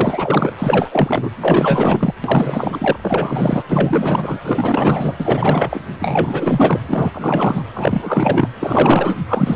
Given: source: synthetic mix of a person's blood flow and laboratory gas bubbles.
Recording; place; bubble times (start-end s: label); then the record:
Doppler ultrasound of blood flow; precordium
0.00-0.52 s: bubbles
0.58-1.30 s: bubbles
1.41-2.14 s: bubbles
2.24-3.62 s: bubbles
3.68-4.38 s: bubbles
4.44-5.14 s: bubbles
5.19-5.80 s: bubbles
5.99-6.80 s: bubbles
6.88-7.10 s: bubbles
7.13-7.65 s: bubbles
7.74-8.49 s: bubbles
8.60-9.18 s: bubbles
9.28-9.56 s: bubbles
From the record:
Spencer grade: 4 (maximum detectable bubble signal sounding continuously throughout systole and diastole of every cardiac period, and overriding the amplitude of the normal cardiac signals); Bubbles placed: anywhere in the cardiac cycle